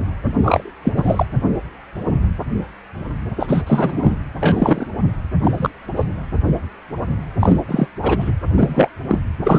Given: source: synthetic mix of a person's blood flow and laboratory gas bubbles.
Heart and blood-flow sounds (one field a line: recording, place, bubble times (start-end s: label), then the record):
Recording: Doppler ultrasound of blood flow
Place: precordium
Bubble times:
0.42-0.72 s: bubbles
0.83-0.93 s: bubbles
0.97-1.26 s: bubbles
3.40-3.62 s: bubbles
3.66-4.16 s: bubbles
4.40-4.87 s: bubbles
5.42-5.70 s: bubbles
5.96-6.07 s: bubbles
7.40-7.61 s: bubbles
7.68-7.87 s: bubbles
8.01-8.31 s: bubbles
8.57-8.88 s: bubbles
9.08-9.19 s: bubbles
9.43-9.59 s: bubbles
From the record:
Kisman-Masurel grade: 233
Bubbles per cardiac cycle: several, 3 to 8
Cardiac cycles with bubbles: 50 to 99%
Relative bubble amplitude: loud (0.450 to 0.775)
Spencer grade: 3 (all of the cardiac periods contain showers or single bubble signals, but not dominating or overriding the cardiac motion signals)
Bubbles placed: anywhere in the cardiac cycle